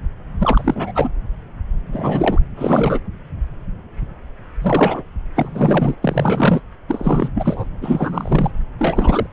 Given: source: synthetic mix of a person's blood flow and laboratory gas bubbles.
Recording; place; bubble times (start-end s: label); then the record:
Doppler ultrasound of blood flow; subclavian vein
0.39-0.92 s: bubbles
0.95-1.08 s: bubbles
1.87-2.39 s: bubbles
2.56-2.99 s: bubbles
4.61-5.04 s: bubbles
5.35-5.94 s: bubbles
6.01-6.60 s: bubbles
6.88-7.65 s: bubbles
7.81-8.50 s: bubbles
8.79-9.26 s: bubbles
From the record:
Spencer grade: 3 (all of the cardiac periods contain showers or single bubble signals, but not dominating or overriding the cardiac motion signals); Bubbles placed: anywhere in the cardiac cycle